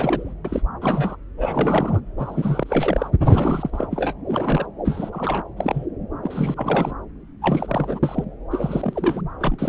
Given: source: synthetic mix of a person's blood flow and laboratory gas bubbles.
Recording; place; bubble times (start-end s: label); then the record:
Doppler ultrasound of blood flow; subclavian vein
0.00-0.33 s: bubbles
0.45-0.61 s: bubbles
0.81-1.17 s: bubbles
1.38-2.00 s: bubbles
2.17-3.10 s: bubbles
3.24-3.89 s: bubbles
3.91-4.14 s: bubbles
4.27-4.66 s: bubbles
4.85-5.42 s: bubbles
5.57-5.86 s: bubbles
6.23-6.94 s: bubbles
7.42-7.99 s: bubbles
8.03-8.24 s: bubbles
8.50-9.21 s: bubbles
9.40-9.69 s: bubbles
From the record:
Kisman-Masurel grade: 242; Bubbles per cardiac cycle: several, 3 to 8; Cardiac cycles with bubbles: 100%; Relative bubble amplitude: moderate (0.250 to 0.450); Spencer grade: 3 (all of the cardiac periods contain showers or single bubble signals, but not dominating or overriding the cardiac motion signals); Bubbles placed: anywhere in the cardiac cycle